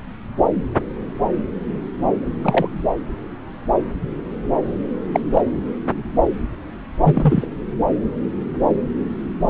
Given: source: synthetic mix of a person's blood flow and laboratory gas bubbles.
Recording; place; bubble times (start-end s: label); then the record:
Doppler ultrasound of blood flow; subclavian vein
2.44-2.69 s: bubbles
5.12-5.20 s: bubbles
5.33-5.42 s: bubbles
7.04-7.46 s: bubbles
From the record:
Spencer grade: 2 (many but less than half of the cardiac periods contain bubble signals, singularly or in groups); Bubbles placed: anywhere in the cardiac cycle